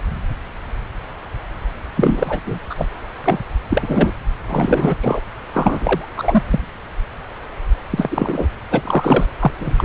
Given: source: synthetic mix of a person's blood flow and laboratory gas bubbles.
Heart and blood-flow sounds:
Doppler ultrasound of blood flow; subclavian vein
1.96-2.40 s: bubbles
2.45-2.59 s: bubbles
2.69-2.86 s: bubbles
3.24-3.39 s: bubbles
3.69-4.12 s: bubbles
4.47-4.97 s: bubbles
5.01-5.21 s: bubbles
5.53-6.10 s: bubbles
6.16-6.43 s: bubbles
6.51-6.60 s: bubbles
7.90-8.48 s: bubbles
8.71-9.25 s: bubbles
9.40-9.51 s: bubbles
9.59-9.85 s: bubbles
From the record:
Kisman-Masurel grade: 333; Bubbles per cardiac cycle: rolling drumbeat, 9 or more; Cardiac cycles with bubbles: 50 to 99%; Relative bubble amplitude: loud (0.450 to 0.775); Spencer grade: 3 (all of the cardiac periods contain showers or single bubble signals, but not dominating or overriding the cardiac motion signals); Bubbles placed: anywhere in the cardiac cycle

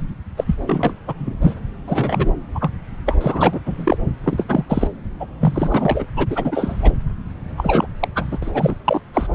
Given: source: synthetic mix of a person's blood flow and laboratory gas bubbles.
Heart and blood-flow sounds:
Doppler ultrasound of blood flow; subclavian vein
0.36-0.44 s: bubbles
0.46-0.55 s: bubbles
0.66-0.94 s: bubbles
1.07-1.14 s: bubbles
1.18-1.35 s: bubbles
1.41-1.55 s: bubbles
1.88-2.33 s: bubbles
2.54-2.71 s: bubbles
3.06-3.15 s: bubbles
3.21-3.60 s: bubbles
3.65-3.98 s: bubbles
4.24-4.44 s: bubbles
4.48-4.65 s: bubbles
4.69-4.88 s: bubbles
5.19-5.26 s: bubbles
5.40-6.05 s: bubbles
6.16-6.27 s: bubbles
6.30-6.92 s: bubbles
7.57-7.87 s: bubbles
7.99-8.08 s: bubbles
8.15-8.25 s: bubbles
8.31-8.38 s: bubbles
8.42-8.75 s: bubbles
8.84-9.01 s: bubbles
9.13-9.35 s: bubbles
From the record:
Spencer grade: 3 (all of the cardiac periods contain showers or single bubble signals, but not dominating or overriding the cardiac motion signals); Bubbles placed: anywhere in the cardiac cycle

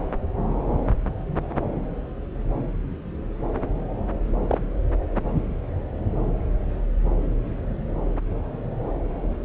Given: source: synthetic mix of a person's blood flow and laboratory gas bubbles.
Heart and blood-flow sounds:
Doppler ultrasound of blood flow; subclavian vein
4.48-4.58 s: bubbles
From the record:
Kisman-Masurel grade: 112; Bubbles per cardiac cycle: 1 to 2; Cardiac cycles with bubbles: 1 to 10%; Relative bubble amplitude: moderate (0.250 to 0.450); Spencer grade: 1 (occasional bubble signal discernible with the cardiac motion signal, with majority of cardiac periods free of bubbles); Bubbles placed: anywhere in the cardiac cycle

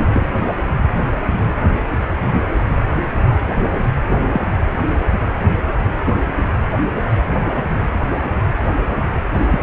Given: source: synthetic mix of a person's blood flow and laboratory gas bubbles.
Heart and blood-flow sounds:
Doppler ultrasound of blood flow; precordium
0.13-0.26 s: bubbles
4.32-4.42 s: bubbles
6.05-6.15 s: bubbles
7.55-7.63 s: bubbles
8.96-9.02 s: bubbles
9.51-9.61 s: bubbles
From the record:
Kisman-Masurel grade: 122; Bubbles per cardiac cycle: 1 to 2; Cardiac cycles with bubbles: 10 to 50%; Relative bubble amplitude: moderate (0.250 to 0.450); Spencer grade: 2 (many but less than half of the cardiac periods contain bubble signals, singularly or in groups); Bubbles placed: anywhere in the cardiac cycle

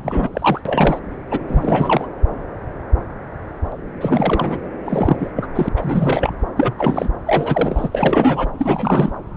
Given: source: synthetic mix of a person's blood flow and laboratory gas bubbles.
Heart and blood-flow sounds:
Doppler ultrasound of blood flow; subclavian vein
0.03-0.29 s: bubbles
0.33-0.61 s: bubbles
0.65-0.99 s: bubbles
1.31-1.39 s: bubbles
1.48-2.08 s: bubbles
4.00-4.58 s: bubbles
4.85-5.31 s: bubbles
5.36-5.47 s: bubbles
5.54-5.69 s: bubbles
5.76-6.33 s: bubbles
6.57-6.75 s: bubbles
6.78-7.09 s: bubbles
7.26-7.88 s: bubbles
7.92-8.46 s: bubbles
8.59-9.12 s: bubbles
From the record:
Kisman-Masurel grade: 333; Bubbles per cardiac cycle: rolling drumbeat, 9 or more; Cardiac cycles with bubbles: 50 to 99%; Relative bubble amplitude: loud (0.450 to 0.775); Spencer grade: 3 (all of the cardiac periods contain showers or single bubble signals, but not dominating or overriding the cardiac motion signals); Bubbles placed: anywhere in the cardiac cycle

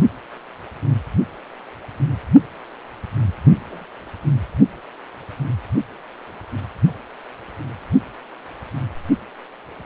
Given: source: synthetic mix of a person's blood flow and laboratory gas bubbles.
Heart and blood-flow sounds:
Doppler ultrasound of blood flow; precordium
3.70-3.85 s: bubbles
From the record:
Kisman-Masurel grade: 121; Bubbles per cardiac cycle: 1 to 2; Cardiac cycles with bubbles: 10 to 50%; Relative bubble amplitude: barely perceptible (0.100 to 0.250); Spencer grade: 2 (many but less than half of the cardiac periods contain bubble signals, singularly or in groups); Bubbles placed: only in the low amplitude regions of the cardiac cycle

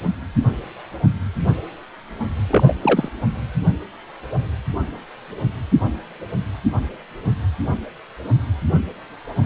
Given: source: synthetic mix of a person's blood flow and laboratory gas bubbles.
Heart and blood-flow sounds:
Doppler ultrasound of blood flow; precordium
2.48-2.75 s: bubbles
2.81-3.09 s: bubbles
From the record:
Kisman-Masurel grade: 212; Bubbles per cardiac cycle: several, 3 to 8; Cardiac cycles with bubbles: 1 to 10%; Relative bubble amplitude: moderate (0.250 to 0.450); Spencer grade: 1 (occasional bubble signal discernible with the cardiac motion signal, with majority of cardiac periods free of bubbles); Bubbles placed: anywhere in the cardiac cycle

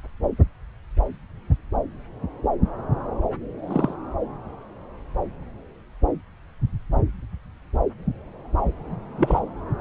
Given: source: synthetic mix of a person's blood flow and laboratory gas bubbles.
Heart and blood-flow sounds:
Doppler ultrasound of blood flow; subclavian vein
3.67-3.94 s: bubbles
9.18-9.39 s: bubbles
From the record:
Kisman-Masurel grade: 122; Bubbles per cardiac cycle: 1 to 2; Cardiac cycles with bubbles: 10 to 50%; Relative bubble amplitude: moderate (0.250 to 0.450); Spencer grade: 2 (many but less than half of the cardiac periods contain bubble signals, singularly or in groups); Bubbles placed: anywhere in the cardiac cycle

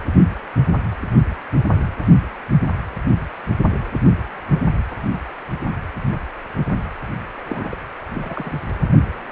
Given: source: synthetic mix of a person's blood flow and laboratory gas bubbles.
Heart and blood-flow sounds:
Doppler ultrasound of blood flow; precordium
7.47-7.78 s: bubbles
8.14-8.59 s: bubbles
From the record:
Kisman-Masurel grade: 221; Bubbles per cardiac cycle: several, 3 to 8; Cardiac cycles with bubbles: 10 to 50%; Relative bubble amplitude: barely perceptible (0.100 to 0.250); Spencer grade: 2 (many but less than half of the cardiac periods contain bubble signals, singularly or in groups); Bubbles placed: anywhere in the cardiac cycle

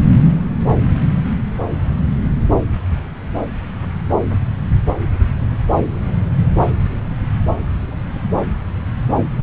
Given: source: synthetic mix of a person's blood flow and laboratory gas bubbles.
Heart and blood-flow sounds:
Doppler ultrasound of blood flow; subclavian vein
no bubbles
From the record:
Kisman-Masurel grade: 000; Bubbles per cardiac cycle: 0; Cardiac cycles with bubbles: 0%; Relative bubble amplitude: no bubbles discernible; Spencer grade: 0 (complete lack of bubble signals)

